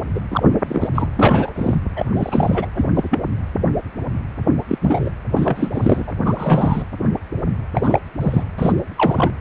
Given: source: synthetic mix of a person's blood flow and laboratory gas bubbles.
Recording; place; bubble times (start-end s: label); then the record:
Doppler ultrasound of blood flow; precordium
0.14-0.20 s: bubbles
0.30-0.43 s: bubbles
0.67-0.89 s: bubbles
0.95-1.08 s: bubbles
1.17-1.76 s: bubbles
1.96-2.06 s: bubbles
2.15-2.65 s: bubbles
2.74-2.85 s: bubbles
2.95-3.19 s: bubbles
4.68-4.79 s: bubbles
4.81-5.09 s: bubbles
5.35-5.70 s: bubbles
5.72-6.04 s: bubbles
6.07-6.13 s: bubbles
6.25-6.83 s: bubbles
7.74-8.00 s: bubbles
8.21-8.44 s: bubbles
8.58-8.73 s: bubbles
8.96-9.31 s: bubbles
From the record:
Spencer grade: 3 (all of the cardiac periods contain showers or single bubble signals, but not dominating or overriding the cardiac motion signals); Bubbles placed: anywhere in the cardiac cycle